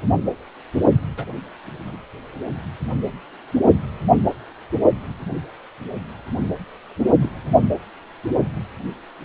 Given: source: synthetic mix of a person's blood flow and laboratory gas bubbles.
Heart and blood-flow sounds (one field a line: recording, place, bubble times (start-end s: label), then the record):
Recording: Doppler ultrasound of blood flow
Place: precordium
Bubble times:
1.17-1.25 s: bubbles
1.86-1.97 s: bubbles
7.20-7.31 s: bubbles
From the record:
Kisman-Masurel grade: 121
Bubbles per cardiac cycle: 1 to 2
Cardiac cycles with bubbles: 10 to 50%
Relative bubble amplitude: barely perceptible (0.100 to 0.250)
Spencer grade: 2 (many but less than half of the cardiac periods contain bubble signals, singularly or in groups)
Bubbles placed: only in the low amplitude regions of the cardiac cycle